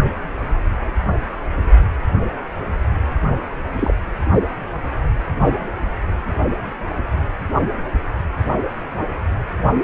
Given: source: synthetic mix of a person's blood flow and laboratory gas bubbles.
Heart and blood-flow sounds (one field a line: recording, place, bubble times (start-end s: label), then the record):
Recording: Doppler ultrasound of blood flow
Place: precordium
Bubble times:
3.76-3.92 s: bubbles
From the record:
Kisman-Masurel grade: 122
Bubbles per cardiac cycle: 1 to 2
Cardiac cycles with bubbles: 10 to 50%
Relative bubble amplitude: moderate (0.250 to 0.450)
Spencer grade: 2 (many but less than half of the cardiac periods contain bubble signals, singularly or in groups)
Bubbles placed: anywhere in the cardiac cycle